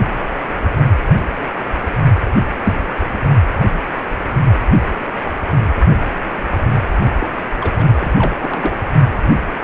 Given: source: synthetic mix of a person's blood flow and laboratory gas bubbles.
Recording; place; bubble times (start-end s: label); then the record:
Doppler ultrasound of blood flow; precordium
7.17-7.27 s: bubbles
7.41-7.45 s: bubbles
7.59-8.13 s: bubbles
8.19-8.78 s: bubbles
From the record:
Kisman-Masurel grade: 212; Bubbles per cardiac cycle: several, 3 to 8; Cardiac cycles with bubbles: 1 to 10%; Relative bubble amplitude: moderate (0.250 to 0.450); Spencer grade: 1 (occasional bubble signal discernible with the cardiac motion signal, with majority of cardiac periods free of bubbles); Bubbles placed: only in the low amplitude regions of the cardiac cycle